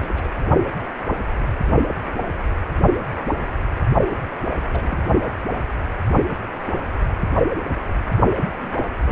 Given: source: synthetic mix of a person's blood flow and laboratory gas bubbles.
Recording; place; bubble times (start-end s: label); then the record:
Doppler ultrasound of blood flow; precordium
0.00-0.27 s: bubbles
4.05-4.58 s: bubbles
4.72-5.07 s: bubbles
8.36-8.45 s: bubbles
8.57-8.84 s: bubbles
9.06-9.12 s: bubbles
From the record:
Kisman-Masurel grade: 221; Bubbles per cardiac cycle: several, 3 to 8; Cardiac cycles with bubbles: 10 to 50%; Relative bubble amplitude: barely perceptible (0.100 to 0.250); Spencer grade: 2 (many but less than half of the cardiac periods contain bubble signals, singularly or in groups); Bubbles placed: only in the low amplitude regions of the cardiac cycle